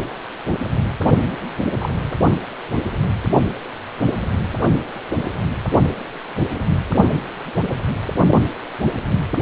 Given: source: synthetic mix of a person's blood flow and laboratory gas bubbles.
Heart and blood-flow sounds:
Doppler ultrasound of blood flow; precordium
1.78-1.94 s: bubbles
From the record:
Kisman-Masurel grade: 112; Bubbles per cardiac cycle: 1 to 2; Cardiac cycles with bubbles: 1 to 10%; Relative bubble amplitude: moderate (0.250 to 0.450); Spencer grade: 1 (occasional bubble signal discernible with the cardiac motion signal, with majority of cardiac periods free of bubbles); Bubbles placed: only in the low amplitude regions of the cardiac cycle

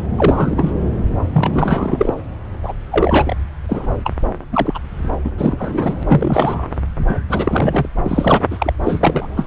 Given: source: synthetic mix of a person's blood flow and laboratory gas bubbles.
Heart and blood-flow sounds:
Doppler ultrasound of blood flow; subclavian vein
0.18-0.72 s: bubbles
1.33-2.15 s: bubbles
2.62-2.73 s: bubbles
2.92-3.34 s: bubbles
3.69-3.87 s: bubbles
4.04-4.12 s: bubbles
4.52-4.79 s: bubbles
5.23-5.30 s: bubbles
5.38-6.03 s: bubbles
6.08-6.67 s: bubbles
7.08-7.21 s: bubbles
7.29-7.89 s: bubbles
8.03-8.45 s: bubbles
8.50-8.73 s: bubbles
8.87-9.27 s: bubbles
9.36-9.47 s: bubbles
From the record:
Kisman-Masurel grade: 243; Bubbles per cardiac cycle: several, 3 to 8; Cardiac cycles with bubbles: 100%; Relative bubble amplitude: loud (0.450 to 0.775); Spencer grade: 3 (all of the cardiac periods contain showers or single bubble signals, but not dominating or overriding the cardiac motion signals); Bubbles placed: anywhere in the cardiac cycle

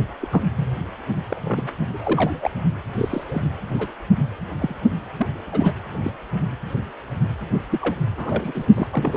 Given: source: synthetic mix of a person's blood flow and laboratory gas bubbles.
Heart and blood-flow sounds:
Doppler ultrasound of blood flow; precordium
0.20-0.44 s: bubbles
0.56-0.85 s: bubbles
1.29-1.40 s: bubbles
1.42-1.69 s: bubbles
1.93-2.50 s: bubbles
2.97-3.23 s: bubbles
3.29-3.47 s: bubbles
3.78-3.88 s: bubbles
4.59-4.75 s: bubbles
5.17-5.27 s: bubbles
5.52-5.73 s: bubbles
6.02-6.11 s: bubbles
7.71-7.95 s: bubbles
8.17-8.66 s: bubbles
8.73-8.88 s: bubbles
8.90-9.17 s: bubbles
From the record:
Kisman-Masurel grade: 232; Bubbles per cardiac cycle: several, 3 to 8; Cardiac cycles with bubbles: 50 to 99%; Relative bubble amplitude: moderate (0.250 to 0.450); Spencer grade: 3 (all of the cardiac periods contain showers or single bubble signals, but not dominating or overriding the cardiac motion signals); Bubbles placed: only in the low amplitude regions of the cardiac cycle

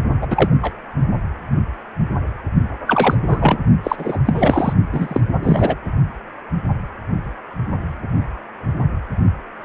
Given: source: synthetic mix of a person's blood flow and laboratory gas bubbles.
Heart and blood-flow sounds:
Doppler ultrasound of blood flow; precordium
0.21-0.28 s: bubbles
0.30-0.49 s: bubbles
0.61-0.73 s: bubbles
2.86-3.15 s: bubbles
3.27-3.58 s: bubbles
3.83-4.18 s: bubbles
4.25-4.73 s: bubbles
4.92-5.21 s: bubbles
5.43-5.75 s: bubbles
From the record:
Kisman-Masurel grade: 223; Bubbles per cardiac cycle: several, 3 to 8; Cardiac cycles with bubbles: 10 to 50%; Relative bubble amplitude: loud (0.450 to 0.775); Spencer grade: 2 (many but less than half of the cardiac periods contain bubble signals, singularly or in groups); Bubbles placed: only in the low amplitude regions of the cardiac cycle

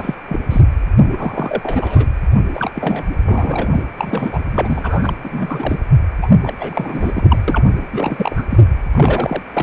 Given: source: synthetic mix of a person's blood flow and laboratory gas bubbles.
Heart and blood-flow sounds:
Doppler ultrasound of blood flow; precordium
0.00-0.15 s: bubbles
0.29-0.40 s: bubbles
0.50-0.61 s: bubbles
1.11-2.08 s: bubbles
2.54-2.71 s: bubbles
2.75-3.04 s: bubbles
3.25-3.83 s: bubbles
3.97-4.40 s: bubbles
4.54-5.13 s: bubbles
5.24-5.79 s: bubbles
6.22-6.28 s: bubbles
6.42-6.54 s: bubbles
6.58-7.38 s: bubbles
7.47-7.63 s: bubbles
7.92-8.46 s: bubbles
8.49-8.64 s: bubbles
8.93-9.42 s: bubbles
9.53-9.63 s: bubbles
From the record:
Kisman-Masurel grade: 333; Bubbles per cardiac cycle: rolling drumbeat, 9 or more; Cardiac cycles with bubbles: 50 to 99%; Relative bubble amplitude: loud (0.450 to 0.775); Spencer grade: 3 (all of the cardiac periods contain showers or single bubble signals, but not dominating or overriding the cardiac motion signals); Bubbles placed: anywhere in the cardiac cycle

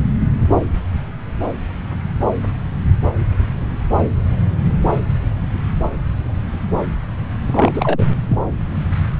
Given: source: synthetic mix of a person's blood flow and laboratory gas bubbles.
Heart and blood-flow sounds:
Doppler ultrasound of blood flow; subclavian vein
7.46-8.05 s: bubbles
8.29-8.38 s: bubbles
From the record:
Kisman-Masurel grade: 212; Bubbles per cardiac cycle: several, 3 to 8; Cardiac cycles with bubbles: 1 to 10%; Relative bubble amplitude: moderate (0.250 to 0.450); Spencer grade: 1 (occasional bubble signal discernible with the cardiac motion signal, with majority of cardiac periods free of bubbles); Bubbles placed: anywhere in the cardiac cycle

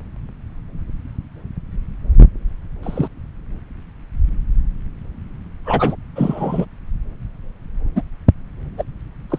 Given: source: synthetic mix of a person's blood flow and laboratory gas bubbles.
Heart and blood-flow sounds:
Doppler ultrasound of blood flow; subclavian vein
2.82-3.08 s: bubbles
5.65-5.96 s: bubbles
6.16-6.66 s: bubbles
7.95-8.02 s: bubbles
8.78-8.84 s: bubbles
9.30-9.39 s: bubbles
From the record:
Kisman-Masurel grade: 123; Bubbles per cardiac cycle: 1 to 2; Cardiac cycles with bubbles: 10 to 50%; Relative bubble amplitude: loud (0.450 to 0.775); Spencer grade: 2 (many but less than half of the cardiac periods contain bubble signals, singularly or in groups); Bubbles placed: anywhere in the cardiac cycle

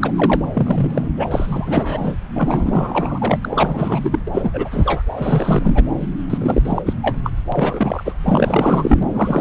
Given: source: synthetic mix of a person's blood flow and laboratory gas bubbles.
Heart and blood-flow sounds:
Doppler ultrasound of blood flow; subclavian vein
0.00-0.11 s: bubbles
0.16-0.45 s: bubbles
0.53-1.09 s: bubbles
1.19-2.16 s: bubbles
2.35-3.37 s: bubbles
3.41-4.01 s: bubbles
4.03-4.19 s: bubbles
4.27-5.02 s: bubbles
5.16-5.83 s: bubbles
6.29-6.82 s: bubbles
6.85-6.93 s: bubbles
7.01-7.17 s: bubbles
7.23-7.31 s: bubbles
7.52-8.12 s: bubbles
8.25-9.03 s: bubbles
9.14-9.41 s: bubbles
From the record:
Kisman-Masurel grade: 343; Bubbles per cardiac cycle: rolling drumbeat, 9 or more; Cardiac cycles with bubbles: 100%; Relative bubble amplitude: loud (0.450 to 0.775); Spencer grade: 3 (all of the cardiac periods contain showers or single bubble signals, but not dominating or overriding the cardiac motion signals); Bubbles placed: anywhere in the cardiac cycle

